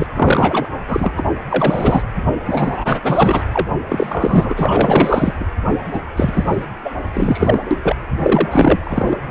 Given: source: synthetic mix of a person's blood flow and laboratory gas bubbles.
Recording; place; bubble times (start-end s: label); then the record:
Doppler ultrasound of blood flow; precordium
0.00-0.07 s: bubbles
0.14-0.67 s: bubbles
0.88-1.13 s: bubbles
1.17-1.23 s: bubbles
1.50-2.02 s: bubbles
2.46-3.00 s: bubbles
3.03-3.42 s: bubbles
3.52-3.67 s: bubbles
3.88-5.46 s: bubbles
5.93-6.00 s: bubbles
6.17-6.66 s: bubbles
6.84-6.91 s: bubbles
7.13-7.59 s: bubbles
7.71-7.79 s: bubbles
7.82-7.96 s: bubbles
8.22-9.18 s: bubbles
From the record:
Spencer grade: 4 (maximum detectable bubble signal sounding continuously throughout systole and diastole of every cardiac period, and overriding the amplitude of the normal cardiac signals); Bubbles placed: anywhere in the cardiac cycle